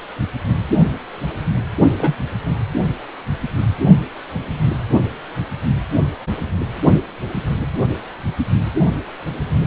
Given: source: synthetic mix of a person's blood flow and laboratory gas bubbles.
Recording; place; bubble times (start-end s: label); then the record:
Doppler ultrasound of blood flow; precordium
1.98-2.16 s: bubbles
From the record:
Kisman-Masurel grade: 112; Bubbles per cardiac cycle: 1 to 2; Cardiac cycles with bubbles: 1 to 10%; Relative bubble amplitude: moderate (0.250 to 0.450); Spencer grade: 1 (occasional bubble signal discernible with the cardiac motion signal, with majority of cardiac periods free of bubbles); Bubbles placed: anywhere in the cardiac cycle